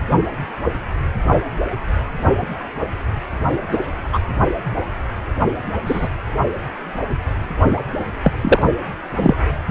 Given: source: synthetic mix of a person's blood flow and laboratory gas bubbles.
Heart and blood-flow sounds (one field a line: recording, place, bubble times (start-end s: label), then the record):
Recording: Doppler ultrasound of blood flow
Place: precordium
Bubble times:
3.71-3.79 s: bubbles
4.12-4.19 s: bubbles
5.85-6.08 s: bubbles
8.24-8.32 s: bubbles
8.41-8.62 s: bubbles
9.17-9.35 s: bubbles
From the record:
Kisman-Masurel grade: 123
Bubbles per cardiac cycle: 1 to 2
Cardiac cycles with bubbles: 10 to 50%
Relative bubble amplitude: loud (0.450 to 0.775)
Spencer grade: 2 (many but less than half of the cardiac periods contain bubble signals, singularly or in groups)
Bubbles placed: only in the low amplitude regions of the cardiac cycle